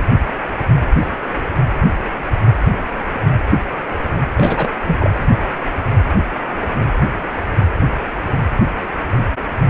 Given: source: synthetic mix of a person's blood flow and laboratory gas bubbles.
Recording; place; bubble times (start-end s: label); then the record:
Doppler ultrasound of blood flow; precordium
4.34-4.71 s: bubbles
4.87-4.96 s: bubbles
5.00-5.10 s: bubbles
From the record:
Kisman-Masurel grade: 212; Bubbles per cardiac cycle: several, 3 to 8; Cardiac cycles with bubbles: 1 to 10%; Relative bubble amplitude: moderate (0.250 to 0.450); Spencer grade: 1 (occasional bubble signal discernible with the cardiac motion signal, with majority of cardiac periods free of bubbles); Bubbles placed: anywhere in the cardiac cycle